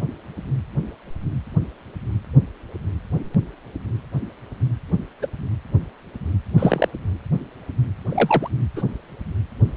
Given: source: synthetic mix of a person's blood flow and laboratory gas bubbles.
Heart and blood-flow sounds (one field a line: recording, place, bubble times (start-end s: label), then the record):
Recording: Doppler ultrasound of blood flow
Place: precordium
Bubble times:
5.21-5.26 s: bubbles
6.58-6.89 s: bubbles
8.09-8.48 s: bubbles
8.76-8.82 s: bubbles
From the record:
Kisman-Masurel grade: 123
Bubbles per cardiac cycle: 1 to 2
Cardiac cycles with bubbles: 10 to 50%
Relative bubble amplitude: loud (0.450 to 0.775)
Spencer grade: 2 (many but less than half of the cardiac periods contain bubble signals, singularly or in groups)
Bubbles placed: anywhere in the cardiac cycle